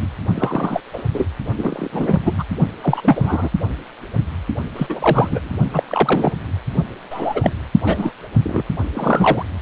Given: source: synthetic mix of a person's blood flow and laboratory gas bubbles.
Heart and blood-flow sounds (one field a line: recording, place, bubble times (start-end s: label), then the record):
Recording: Doppler ultrasound of blood flow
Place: precordium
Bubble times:
0.00-0.09 s: bubbles
0.34-0.80 s: bubbles
0.93-1.03 s: bubbles
1.13-1.29 s: bubbles
1.56-1.89 s: bubbles
1.93-2.19 s: bubbles
2.24-2.43 s: bubbles
2.83-3.49 s: bubbles
4.76-4.87 s: bubbles
4.89-5.50 s: bubbles
5.72-5.83 s: bubbles
5.88-6.32 s: bubbles
7.10-7.58 s: bubbles
7.84-8.12 s: bubbles
8.43-8.63 s: bubbles
8.94-9.45 s: bubbles
From the record:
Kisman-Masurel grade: 233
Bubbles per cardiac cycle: several, 3 to 8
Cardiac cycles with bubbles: 50 to 99%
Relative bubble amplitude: loud (0.450 to 0.775)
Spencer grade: 3 (all of the cardiac periods contain showers or single bubble signals, but not dominating or overriding the cardiac motion signals)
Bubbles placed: only in the low amplitude regions of the cardiac cycle